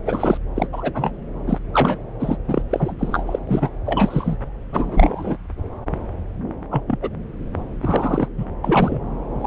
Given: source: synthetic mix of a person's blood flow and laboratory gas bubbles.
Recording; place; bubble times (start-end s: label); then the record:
Doppler ultrasound of blood flow; subclavian vein
0.05-0.38 s: bubbles
0.56-0.69 s: bubbles
0.72-1.11 s: bubbles
1.47-1.58 s: bubbles
1.73-1.98 s: bubbles
2.20-2.37 s: bubbles
2.48-2.62 s: bubbles
2.70-2.95 s: bubbles
2.99-3.24 s: bubbles
3.26-3.39 s: bubbles
3.47-3.69 s: bubbles
3.86-4.36 s: bubbles
4.72-5.37 s: bubbles
6.71-6.83 s: bubbles
6.87-6.98 s: bubbles
7.01-7.09 s: bubbles
7.82-8.29 s: bubbles
8.38-8.46 s: bubbles
8.64-9.01 s: bubbles
9.39-9.47 s: bubbles
From the record:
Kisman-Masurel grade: 233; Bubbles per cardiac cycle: several, 3 to 8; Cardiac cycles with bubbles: 50 to 99%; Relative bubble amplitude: loud (0.450 to 0.775); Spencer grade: 3 (all of the cardiac periods contain showers or single bubble signals, but not dominating or overriding the cardiac motion signals); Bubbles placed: anywhere in the cardiac cycle